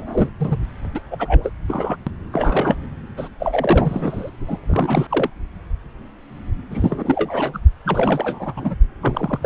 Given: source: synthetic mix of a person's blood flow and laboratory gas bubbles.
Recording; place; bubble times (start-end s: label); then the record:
Doppler ultrasound of blood flow; subclavian vein
0.00-0.30 s: bubbles
0.39-0.57 s: bubbles
0.94-1.00 s: bubbles
1.10-1.51 s: bubbles
1.68-1.96 s: bubbles
2.06-2.11 s: bubbles
2.32-2.75 s: bubbles
3.17-3.28 s: bubbles
3.40-4.31 s: bubbles
4.47-4.60 s: bubbles
4.68-5.30 s: bubbles
6.71-7.60 s: bubbles
7.85-8.54 s: bubbles
8.56-8.76 s: bubbles
9.01-9.39 s: bubbles
9.42-9.46 s: bubbles
From the record:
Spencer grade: 3 (all of the cardiac periods contain showers or single bubble signals, but not dominating or overriding the cardiac motion signals); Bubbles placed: anywhere in the cardiac cycle